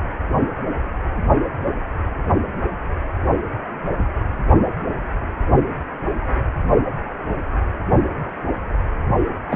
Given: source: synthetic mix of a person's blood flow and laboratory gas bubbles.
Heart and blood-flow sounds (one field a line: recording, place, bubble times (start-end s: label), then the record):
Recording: Doppler ultrasound of blood flow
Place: precordium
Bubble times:
9.50-9.56 s: bubbles
From the record:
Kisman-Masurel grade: 212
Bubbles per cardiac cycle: several, 3 to 8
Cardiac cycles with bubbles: 1 to 10%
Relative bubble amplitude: moderate (0.250 to 0.450)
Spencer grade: 1 (occasional bubble signal discernible with the cardiac motion signal, with majority of cardiac periods free of bubbles)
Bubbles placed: only in the low amplitude regions of the cardiac cycle